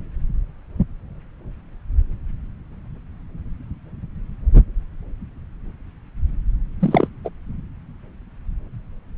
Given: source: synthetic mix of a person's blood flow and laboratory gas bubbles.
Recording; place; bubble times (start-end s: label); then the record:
Doppler ultrasound of blood flow; subclavian vein
6.80-7.07 s: bubbles
7.25-7.29 s: bubbles
From the record:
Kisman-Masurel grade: 212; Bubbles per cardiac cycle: several, 3 to 8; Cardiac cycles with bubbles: 1 to 10%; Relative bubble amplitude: moderate (0.250 to 0.450); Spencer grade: 1 (occasional bubble signal discernible with the cardiac motion signal, with majority of cardiac periods free of bubbles); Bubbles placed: anywhere in the cardiac cycle